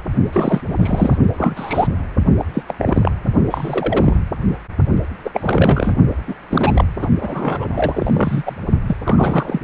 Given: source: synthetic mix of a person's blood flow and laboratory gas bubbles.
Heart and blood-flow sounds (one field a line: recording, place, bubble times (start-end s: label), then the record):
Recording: Doppler ultrasound of blood flow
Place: precordium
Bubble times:
0.32-0.61 s: bubbles
0.65-1.17 s: bubbles
1.37-1.88 s: bubbles
2.38-2.45 s: bubbles
2.54-2.62 s: bubbles
2.67-2.74 s: bubbles
2.78-3.11 s: bubbles
3.50-4.17 s: bubbles
5.24-5.30 s: bubbles
5.34-5.95 s: bubbles
6.28-6.34 s: bubbles
6.50-6.85 s: bubbles
6.98-7.09 s: bubbles
7.21-8.43 s: bubbles
8.46-8.56 s: bubbles
8.87-8.96 s: bubbles
9.04-9.61 s: bubbles
From the record:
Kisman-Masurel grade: 232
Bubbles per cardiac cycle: several, 3 to 8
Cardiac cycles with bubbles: 50 to 99%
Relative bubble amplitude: moderate (0.250 to 0.450)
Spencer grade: 3 (all of the cardiac periods contain showers or single bubble signals, but not dominating or overriding the cardiac motion signals)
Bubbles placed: only in the low amplitude regions of the cardiac cycle